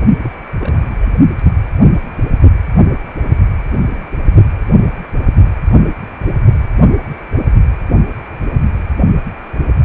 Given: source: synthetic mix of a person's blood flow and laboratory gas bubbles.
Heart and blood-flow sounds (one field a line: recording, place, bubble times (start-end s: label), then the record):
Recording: Doppler ultrasound of blood flow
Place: precordium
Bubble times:
0.18-0.39 s: bubbles
0.55-1.06 s: bubbles
From the record:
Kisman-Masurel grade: 211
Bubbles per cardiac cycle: several, 3 to 8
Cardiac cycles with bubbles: 1 to 10%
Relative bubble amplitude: barely perceptible (0.100 to 0.250)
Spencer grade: 1 (occasional bubble signal discernible with the cardiac motion signal, with majority of cardiac periods free of bubbles)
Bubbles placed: only in the low amplitude regions of the cardiac cycle